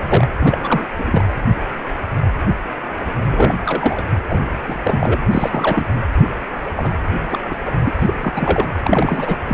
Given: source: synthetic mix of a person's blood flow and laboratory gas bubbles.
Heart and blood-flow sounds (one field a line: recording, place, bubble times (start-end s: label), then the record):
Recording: Doppler ultrasound of blood flow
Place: precordium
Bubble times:
0.00-0.28 s: bubbles
0.40-0.86 s: bubbles
0.98-1.24 s: bubbles
3.24-3.60 s: bubbles
3.66-4.06 s: bubbles
4.27-4.40 s: bubbles
4.49-5.21 s: bubbles
5.31-5.86 s: bubbles
6.77-6.94 s: bubbles
7.31-7.38 s: bubbles
7.50-7.56 s: bubbles
7.65-7.72 s: bubbles
7.84-7.93 s: bubbles
8.00-8.14 s: bubbles
8.23-8.66 s: bubbles
8.82-9.38 s: bubbles
9.46-9.54 s: bubbles
From the record:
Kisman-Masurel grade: 332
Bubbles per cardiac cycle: rolling drumbeat, 9 or more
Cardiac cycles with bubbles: 50 to 99%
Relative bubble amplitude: moderate (0.250 to 0.450)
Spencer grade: 3 (all of the cardiac periods contain showers or single bubble signals, but not dominating or overriding the cardiac motion signals)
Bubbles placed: anywhere in the cardiac cycle